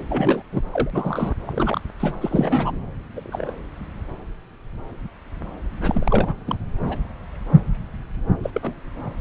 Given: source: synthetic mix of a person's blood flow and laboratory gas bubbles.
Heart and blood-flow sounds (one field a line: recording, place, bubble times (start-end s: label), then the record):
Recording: Doppler ultrasound of blood flow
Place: subclavian vein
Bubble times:
0.07-0.43 s: bubbles
0.51-0.61 s: bubbles
0.71-1.35 s: bubbles
1.45-1.81 s: bubbles
2.00-2.16 s: bubbles
2.21-2.78 s: bubbles
3.14-3.52 s: bubbles
5.81-6.34 s: bubbles
6.47-6.55 s: bubbles
6.83-6.96 s: bubbles
8.42-8.73 s: bubbles
9.18-9.21 s: bubbles
From the record:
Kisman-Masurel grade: 232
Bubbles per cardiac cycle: several, 3 to 8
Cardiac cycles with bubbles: 50 to 99%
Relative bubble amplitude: moderate (0.250 to 0.450)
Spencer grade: 3 (all of the cardiac periods contain showers or single bubble signals, but not dominating or overriding the cardiac motion signals)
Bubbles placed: anywhere in the cardiac cycle